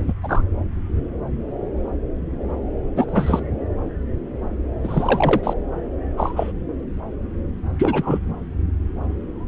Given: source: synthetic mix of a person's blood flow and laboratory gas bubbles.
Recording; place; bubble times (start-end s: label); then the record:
Doppler ultrasound of blood flow; subclavian vein
0.07-0.13 s: bubbles
0.23-0.42 s: bubbles
2.96-3.43 s: bubbles
4.83-5.53 s: bubbles
6.17-6.52 s: bubbles
7.78-8.20 s: bubbles
From the record:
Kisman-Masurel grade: 232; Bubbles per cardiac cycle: several, 3 to 8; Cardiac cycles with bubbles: 50 to 99%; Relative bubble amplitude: moderate (0.250 to 0.450); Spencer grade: 3 (all of the cardiac periods contain showers or single bubble signals, but not dominating or overriding the cardiac motion signals); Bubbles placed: anywhere in the cardiac cycle